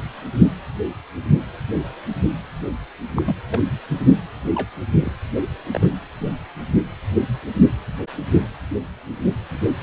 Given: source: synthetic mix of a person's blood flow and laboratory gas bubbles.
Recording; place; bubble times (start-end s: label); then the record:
Doppler ultrasound of blood flow; precordium
3.16-3.36 s: bubbles
3.50-3.60 s: bubbles
3.89-4.01 s: bubbles
4.54-4.68 s: bubbles
5.01-5.12 s: bubbles
5.74-5.92 s: bubbles
From the record:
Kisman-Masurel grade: 121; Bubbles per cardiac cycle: 1 to 2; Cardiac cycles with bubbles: 10 to 50%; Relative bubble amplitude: barely perceptible (0.100 to 0.250); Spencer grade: 2 (many but less than half of the cardiac periods contain bubble signals, singularly or in groups); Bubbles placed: anywhere in the cardiac cycle